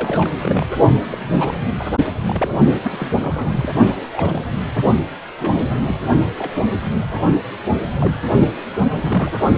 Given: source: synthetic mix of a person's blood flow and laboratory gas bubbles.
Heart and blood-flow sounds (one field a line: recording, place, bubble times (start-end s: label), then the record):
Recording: Doppler ultrasound of blood flow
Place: precordium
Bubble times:
0.00-0.29 s: bubbles
0.42-0.67 s: bubbles
1.10-1.18 s: bubbles
1.33-1.59 s: bubbles
1.79-1.85 s: bubbles
2.06-2.10 s: bubbles
2.27-2.59 s: bubbles
2.83-2.92 s: bubbles
2.96-3.10 s: bubbles
3.21-3.69 s: bubbles
4.13-4.62 s: bubbles
5.38-5.76 s: bubbles
5.87-5.96 s: bubbles
6.38-6.54 s: bubbles
7.09-7.21 s: bubbles
8.00-8.15 s: bubbles
8.94-9.32 s: bubbles
From the record:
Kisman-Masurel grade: 242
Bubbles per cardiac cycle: several, 3 to 8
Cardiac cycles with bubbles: 100%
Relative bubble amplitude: moderate (0.250 to 0.450)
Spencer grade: 3 (all of the cardiac periods contain showers or single bubble signals, but not dominating or overriding the cardiac motion signals)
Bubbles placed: only in the low amplitude regions of the cardiac cycle